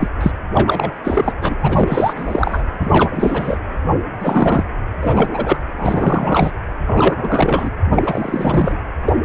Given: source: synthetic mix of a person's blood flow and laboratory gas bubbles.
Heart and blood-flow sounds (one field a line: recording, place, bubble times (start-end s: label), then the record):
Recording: Doppler ultrasound of blood flow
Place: precordium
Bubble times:
0.00-0.08 s: bubbles
0.21-0.31 s: bubbles
0.55-0.92 s: bubbles
1.04-1.33 s: bubbles
1.41-1.55 s: bubbles
1.59-2.13 s: bubbles
2.17-2.63 s: bubbles
2.79-3.59 s: bubbles
4.20-4.63 s: bubbles
5.02-5.58 s: bubbles
5.77-6.52 s: bubbles
6.87-7.70 s: bubbles
7.91-8.78 s: bubbles
9.05-9.13 s: bubbles
From the record:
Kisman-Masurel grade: 343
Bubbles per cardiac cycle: rolling drumbeat, 9 or more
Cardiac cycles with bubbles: 100%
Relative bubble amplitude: loud (0.450 to 0.775)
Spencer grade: 3 (all of the cardiac periods contain showers or single bubble signals, but not dominating or overriding the cardiac motion signals)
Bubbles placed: anywhere in the cardiac cycle